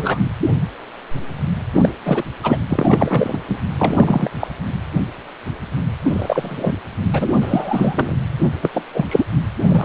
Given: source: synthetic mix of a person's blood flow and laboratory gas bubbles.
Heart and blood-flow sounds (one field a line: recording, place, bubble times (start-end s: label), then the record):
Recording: Doppler ultrasound of blood flow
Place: precordium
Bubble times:
0.00-0.19 s: bubbles
1.73-1.89 s: bubbles
2.04-2.23 s: bubbles
2.43-2.59 s: bubbles
2.69-3.39 s: bubbles
3.48-3.61 s: bubbles
3.79-4.30 s: bubbles
4.40-4.48 s: bubbles
6.05-6.73 s: bubbles
7.12-7.30 s: bubbles
7.41-8.15 s: bubbles
8.62-8.70 s: bubbles
8.74-8.82 s: bubbles
8.94-9.05 s: bubbles
9.08-9.25 s: bubbles
9.69-9.85 s: bubbles
From the record:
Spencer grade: 3 (all of the cardiac periods contain showers or single bubble signals, but not dominating or overriding the cardiac motion signals)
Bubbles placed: anywhere in the cardiac cycle